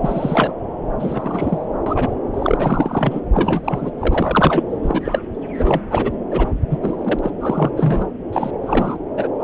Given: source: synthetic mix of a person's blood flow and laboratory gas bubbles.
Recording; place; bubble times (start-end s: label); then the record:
Doppler ultrasound of blood flow; subclavian vein
0.00-0.53 s: bubbles
0.99-1.66 s: bubbles
1.86-2.15 s: bubbles
2.33-3.20 s: bubbles
3.33-3.91 s: bubbles
3.99-4.64 s: bubbles
4.82-5.01 s: bubbles
5.04-5.20 s: bubbles
5.58-5.82 s: bubbles
5.90-6.12 s: bubbles
6.31-6.50 s: bubbles
6.70-6.79 s: bubbles
6.82-7.19 s: bubbles
7.23-7.31 s: bubbles
7.41-7.71 s: bubbles
7.76-8.09 s: bubbles
8.33-8.51 s: bubbles
8.63-8.98 s: bubbles
9.17-9.28 s: bubbles
9.39-9.43 s: bubbles
From the record:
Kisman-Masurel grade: 243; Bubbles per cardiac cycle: several, 3 to 8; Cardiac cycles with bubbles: 100%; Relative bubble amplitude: loud (0.450 to 0.775); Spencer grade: 3 (all of the cardiac periods contain showers or single bubble signals, but not dominating or overriding the cardiac motion signals); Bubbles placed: anywhere in the cardiac cycle